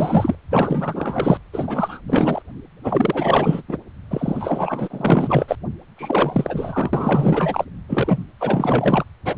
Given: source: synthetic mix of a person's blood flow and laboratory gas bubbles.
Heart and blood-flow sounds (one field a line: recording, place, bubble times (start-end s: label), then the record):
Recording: Doppler ultrasound of blood flow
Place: precordium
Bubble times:
0.00-0.35 s: bubbles
0.50-1.39 s: bubbles
1.53-2.00 s: bubbles
2.07-2.42 s: bubbles
2.83-3.62 s: bubbles
3.68-3.77 s: bubbles
4.10-5.55 s: bubbles
5.97-7.64 s: bubbles
7.88-8.23 s: bubbles
8.40-9.04 s: bubbles
9.24-9.38 s: bubbles
From the record:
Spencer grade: 4 (maximum detectable bubble signal sounding continuously throughout systole and diastole of every cardiac period, and overriding the amplitude of the normal cardiac signals)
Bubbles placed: anywhere in the cardiac cycle